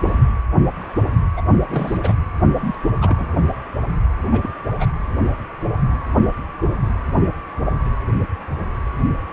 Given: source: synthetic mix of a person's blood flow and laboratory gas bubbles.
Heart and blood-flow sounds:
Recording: Doppler ultrasound of blood flow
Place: precordium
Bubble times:
1.36-1.42 s: bubbles
1.69-1.98 s: bubbles
2.01-2.13 s: bubbles
2.59-2.75 s: bubbles
3.01-3.27 s: bubbles
4.32-4.54 s: bubbles
4.79-4.87 s: bubbles
From the record:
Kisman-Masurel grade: 222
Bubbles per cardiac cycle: several, 3 to 8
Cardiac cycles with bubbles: 10 to 50%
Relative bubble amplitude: moderate (0.250 to 0.450)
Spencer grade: 2 (many but less than half of the cardiac periods contain bubble signals, singularly or in groups)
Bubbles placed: anywhere in the cardiac cycle

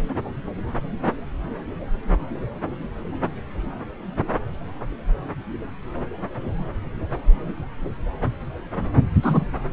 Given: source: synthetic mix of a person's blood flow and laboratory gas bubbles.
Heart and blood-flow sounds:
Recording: Doppler ultrasound of blood flow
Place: subclavian vein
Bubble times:
9.22-9.45 s: bubbles
From the record:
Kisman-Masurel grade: 113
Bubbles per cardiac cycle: 1 to 2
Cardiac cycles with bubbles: 1 to 10%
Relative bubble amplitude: loud (0.450 to 0.775)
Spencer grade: 1 (occasional bubble signal discernible with the cardiac motion signal, with majority of cardiac periods free of bubbles)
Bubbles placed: anywhere in the cardiac cycle

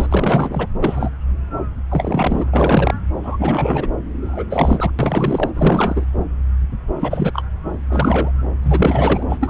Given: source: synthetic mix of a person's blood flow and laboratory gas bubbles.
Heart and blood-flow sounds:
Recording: Doppler ultrasound of blood flow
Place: subclavian vein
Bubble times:
0.00-0.07 s: bubbles
0.09-0.67 s: bubbles
0.82-1.09 s: bubbles
1.89-2.49 s: bubbles
2.54-2.95 s: bubbles
3.23-3.88 s: bubbles
4.21-4.44 s: bubbles
4.49-4.92 s: bubbles
4.99-5.50 s: bubbles
5.55-6.05 s: bubbles
7.00-7.42 s: bubbles
7.89-8.31 s: bubbles
8.62-9.23 s: bubbles
9.29-9.50 s: bubbles
From the record:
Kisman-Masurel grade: 333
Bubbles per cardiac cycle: rolling drumbeat, 9 or more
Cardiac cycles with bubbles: 50 to 99%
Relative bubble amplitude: loud (0.450 to 0.775)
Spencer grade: 3 (all of the cardiac periods contain showers or single bubble signals, but not dominating or overriding the cardiac motion signals)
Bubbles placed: anywhere in the cardiac cycle

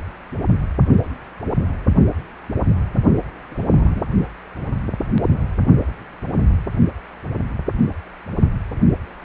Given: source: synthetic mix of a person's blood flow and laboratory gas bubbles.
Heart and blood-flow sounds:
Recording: Doppler ultrasound of blood flow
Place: precordium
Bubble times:
3.51-4.03 s: bubbles
From the record:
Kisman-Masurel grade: 211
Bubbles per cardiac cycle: several, 3 to 8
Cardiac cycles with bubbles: 1 to 10%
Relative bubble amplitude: barely perceptible (0.100 to 0.250)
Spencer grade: 1 (occasional bubble signal discernible with the cardiac motion signal, with majority of cardiac periods free of bubbles)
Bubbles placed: only in the low amplitude regions of the cardiac cycle

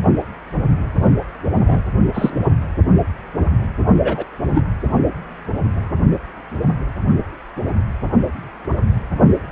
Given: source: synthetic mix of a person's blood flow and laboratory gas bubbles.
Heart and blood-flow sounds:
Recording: Doppler ultrasound of blood flow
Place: precordium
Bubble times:
1.04-1.15 s: bubbles
1.56-1.83 s: bubbles
2.14-2.48 s: bubbles
4.04-4.24 s: bubbles
4.48-4.61 s: bubbles
From the record:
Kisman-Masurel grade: 123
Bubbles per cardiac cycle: 1 to 2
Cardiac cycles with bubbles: 10 to 50%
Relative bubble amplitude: loud (0.450 to 0.775)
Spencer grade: 2 (many but less than half of the cardiac periods contain bubble signals, singularly or in groups)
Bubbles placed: anywhere in the cardiac cycle

